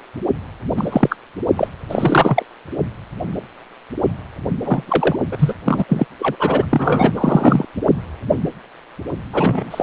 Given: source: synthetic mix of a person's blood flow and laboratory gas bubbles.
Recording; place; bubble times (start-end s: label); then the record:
Doppler ultrasound of blood flow; precordium
0.77-1.16 s: bubbles
1.55-1.68 s: bubbles
1.90-2.43 s: bubbles
4.55-5.16 s: bubbles
5.32-5.54 s: bubbles
5.59-5.62 s: bubbles
5.65-5.84 s: bubbles
5.88-6.05 s: bubbles
6.20-6.36 s: bubbles
6.39-6.66 s: bubbles
6.71-7.12 s: bubbles
7.15-7.65 s: bubbles
9.33-9.83 s: bubbles
From the record:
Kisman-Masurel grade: 233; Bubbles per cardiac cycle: several, 3 to 8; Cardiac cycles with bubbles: 50 to 99%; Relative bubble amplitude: loud (0.450 to 0.775); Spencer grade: 3 (all of the cardiac periods contain showers or single bubble signals, but not dominating or overriding the cardiac motion signals); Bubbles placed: anywhere in the cardiac cycle